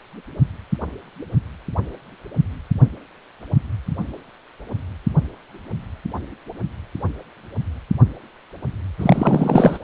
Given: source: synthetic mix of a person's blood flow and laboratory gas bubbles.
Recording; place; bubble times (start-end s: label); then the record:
Doppler ultrasound of blood flow; precordium
8.98-9.78 s: bubbles
From the record:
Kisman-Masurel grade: 213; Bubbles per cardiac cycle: several, 3 to 8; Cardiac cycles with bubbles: 1 to 10%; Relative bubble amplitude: loud (0.450 to 0.775); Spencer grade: 1 (occasional bubble signal discernible with the cardiac motion signal, with majority of cardiac periods free of bubbles); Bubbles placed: anywhere in the cardiac cycle